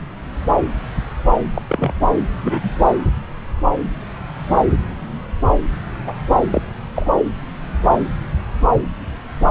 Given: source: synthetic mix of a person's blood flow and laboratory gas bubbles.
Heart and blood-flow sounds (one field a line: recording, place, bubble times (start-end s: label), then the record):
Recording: Doppler ultrasound of blood flow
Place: subclavian vein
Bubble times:
1.55-1.62 s: bubbles
1.69-1.92 s: bubbles
2.42-2.71 s: bubbles
6.06-6.12 s: bubbles
6.52-6.62 s: bubbles
6.96-7.07 s: bubbles
From the record:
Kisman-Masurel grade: 122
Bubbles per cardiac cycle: 1 to 2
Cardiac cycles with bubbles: 10 to 50%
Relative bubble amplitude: moderate (0.250 to 0.450)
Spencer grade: 2 (many but less than half of the cardiac periods contain bubble signals, singularly or in groups)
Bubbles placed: anywhere in the cardiac cycle